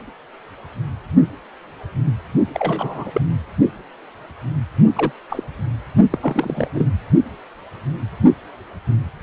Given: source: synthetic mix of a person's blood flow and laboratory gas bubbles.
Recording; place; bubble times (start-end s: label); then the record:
Doppler ultrasound of blood flow; precordium
2.54-3.21 s: bubbles
4.95-5.12 s: bubbles
5.29-5.44 s: bubbles
6.10-6.19 s: bubbles
6.21-6.68 s: bubbles
6.75-6.90 s: bubbles
From the record:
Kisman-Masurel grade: 222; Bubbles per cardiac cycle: several, 3 to 8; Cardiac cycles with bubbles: 10 to 50%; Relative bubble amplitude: moderate (0.250 to 0.450); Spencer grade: 2 (many but less than half of the cardiac periods contain bubble signals, singularly or in groups); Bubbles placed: only in the low amplitude regions of the cardiac cycle